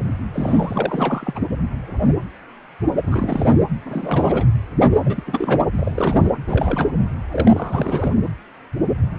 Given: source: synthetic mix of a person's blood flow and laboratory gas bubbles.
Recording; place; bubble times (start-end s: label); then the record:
Doppler ultrasound of blood flow; precordium
0.33-1.40 s: bubbles
3.04-3.56 s: bubbles
3.85-4.46 s: bubbles
5.04-5.23 s: bubbles
5.26-5.60 s: bubbles
5.71-6.33 s: bubbles
6.47-6.89 s: bubbles
7.31-8.13 s: bubbles
From the record:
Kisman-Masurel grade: 332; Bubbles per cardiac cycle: rolling drumbeat, 9 or more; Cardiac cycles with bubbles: 50 to 99%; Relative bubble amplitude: moderate (0.250 to 0.450); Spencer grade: 3 (all of the cardiac periods contain showers or single bubble signals, but not dominating or overriding the cardiac motion signals); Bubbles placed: anywhere in the cardiac cycle